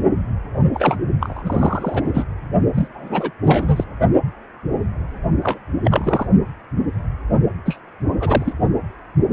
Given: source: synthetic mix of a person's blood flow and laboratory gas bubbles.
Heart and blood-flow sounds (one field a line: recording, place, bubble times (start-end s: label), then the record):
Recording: Doppler ultrasound of blood flow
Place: precordium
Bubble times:
0.73-0.97 s: bubbles
1.20-2.02 s: bubbles
2.04-2.24 s: bubbles
2.74-2.88 s: bubbles
2.95-3.31 s: bubbles
3.43-3.85 s: bubbles
5.43-5.58 s: bubbles
5.83-6.27 s: bubbles
7.66-7.79 s: bubbles
8.20-8.54 s: bubbles
From the record:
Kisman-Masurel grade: 232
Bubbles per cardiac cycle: several, 3 to 8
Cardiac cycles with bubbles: 50 to 99%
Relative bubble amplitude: moderate (0.250 to 0.450)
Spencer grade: 3 (all of the cardiac periods contain showers or single bubble signals, but not dominating or overriding the cardiac motion signals)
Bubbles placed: only in the low amplitude regions of the cardiac cycle